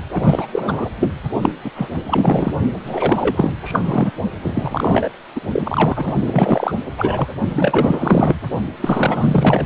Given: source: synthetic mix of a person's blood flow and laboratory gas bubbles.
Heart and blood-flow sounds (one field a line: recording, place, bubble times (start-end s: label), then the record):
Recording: Doppler ultrasound of blood flow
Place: precordium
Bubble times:
0.11-0.47 s: bubbles
0.52-0.90 s: bubbles
0.99-1.10 s: bubbles
1.41-1.52 s: bubbles
1.64-1.71 s: bubbles
1.75-1.89 s: bubbles
2.06-2.52 s: bubbles
2.84-3.54 s: bubbles
3.63-3.81 s: bubbles
3.83-4.11 s: bubbles
4.44-5.09 s: bubbles
5.35-5.41 s: bubbles
5.52-6.14 s: bubbles
6.26-6.75 s: bubbles
6.98-7.38 s: bubbles
7.53-8.39 s: bubbles
8.81-9.66 s: bubbles
From the record:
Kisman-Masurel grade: 444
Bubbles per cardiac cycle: continuous sound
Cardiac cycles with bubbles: 100%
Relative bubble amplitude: maximal (0.775 to 0.999)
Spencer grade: 4 (maximum detectable bubble signal sounding continuously throughout systole and diastole of every cardiac period, and overriding the amplitude of the normal cardiac signals)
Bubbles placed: only in the low amplitude regions of the cardiac cycle